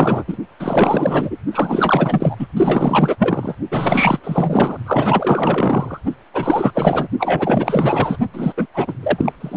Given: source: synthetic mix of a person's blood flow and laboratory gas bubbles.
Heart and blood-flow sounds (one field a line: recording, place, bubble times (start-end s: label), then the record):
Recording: Doppler ultrasound of blood flow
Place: precordium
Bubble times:
0.00-0.25 s: bubbles
0.27-0.37 s: bubbles
0.59-1.38 s: bubbles
1.52-2.36 s: bubbles
2.39-2.47 s: bubbles
2.56-3.16 s: bubbles
3.19-3.55 s: bubbles
3.71-4.19 s: bubbles
4.23-4.78 s: bubbles
4.86-6.00 s: bubbles
6.34-6.71 s: bubbles
6.75-7.07 s: bubbles
7.19-8.17 s: bubbles
8.33-8.53 s: bubbles
8.57-8.66 s: bubbles
8.73-8.94 s: bubbles
9.03-9.32 s: bubbles
9.40-9.57 s: bubbles
From the record:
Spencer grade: 4 (maximum detectable bubble signal sounding continuously throughout systole and diastole of every cardiac period, and overriding the amplitude of the normal cardiac signals)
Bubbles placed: only in the low amplitude regions of the cardiac cycle